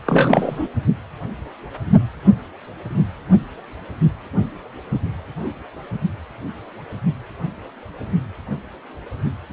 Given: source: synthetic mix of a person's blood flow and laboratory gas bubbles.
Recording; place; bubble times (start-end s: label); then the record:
Doppler ultrasound of blood flow; precordium
0.06-0.68 s: bubbles
From the record:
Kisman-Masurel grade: 213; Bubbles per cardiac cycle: several, 3 to 8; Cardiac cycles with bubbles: 1 to 10%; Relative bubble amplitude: loud (0.450 to 0.775); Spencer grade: 1 (occasional bubble signal discernible with the cardiac motion signal, with majority of cardiac periods free of bubbles); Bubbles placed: only in the low amplitude regions of the cardiac cycle